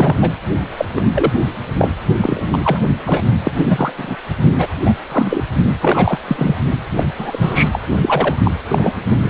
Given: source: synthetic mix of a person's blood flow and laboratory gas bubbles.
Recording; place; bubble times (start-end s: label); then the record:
Doppler ultrasound of blood flow; precordium
0.00-0.16 s: bubbles
0.21-0.32 s: bubbles
0.77-0.85 s: bubbles
0.95-1.02 s: bubbles
1.15-1.31 s: bubbles
1.79-1.92 s: bubbles
2.20-2.41 s: bubbles
2.51-2.82 s: bubbles
3.05-3.22 s: bubbles
3.44-3.52 s: bubbles
3.55-3.92 s: bubbles
3.98-4.16 s: bubbles
4.58-4.69 s: bubbles
4.81-4.94 s: bubbles
5.11-5.42 s: bubbles
5.81-6.19 s: bubbles
6.28-6.57 s: bubbles
6.96-7.04 s: bubbles
7.18-7.70 s: bubbles
7.72-7.79 s: bubbles
8.01-8.36 s: bubbles
8.44-8.52 s: bubbles
8.68-8.93 s: bubbles
9.08-9.30 s: bubbles
From the record:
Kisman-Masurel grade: 243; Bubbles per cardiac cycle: several, 3 to 8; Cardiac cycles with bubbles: 100%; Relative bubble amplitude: loud (0.450 to 0.775); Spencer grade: 3 (all of the cardiac periods contain showers or single bubble signals, but not dominating or overriding the cardiac motion signals); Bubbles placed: only in the low amplitude regions of the cardiac cycle